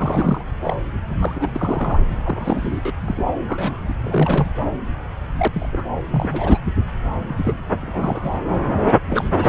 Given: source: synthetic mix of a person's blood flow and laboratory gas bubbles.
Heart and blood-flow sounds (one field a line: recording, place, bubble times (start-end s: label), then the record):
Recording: Doppler ultrasound of blood flow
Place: subclavian vein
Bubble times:
0.00-0.43 s: bubbles
0.63-0.76 s: bubbles
1.05-1.52 s: bubbles
1.55-2.00 s: bubbles
2.24-2.80 s: bubbles
2.85-2.94 s: bubbles
3.02-3.25 s: bubbles
3.47-4.47 s: bubbles
5.38-5.48 s: bubbles
5.52-5.69 s: bubbles
5.72-5.84 s: bubbles
6.11-6.58 s: bubbles
7.18-7.64 s: bubbles
7.82-8.40 s: bubbles
9.07-9.49 s: bubbles
From the record:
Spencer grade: 3 (all of the cardiac periods contain showers or single bubble signals, but not dominating or overriding the cardiac motion signals)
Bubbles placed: anywhere in the cardiac cycle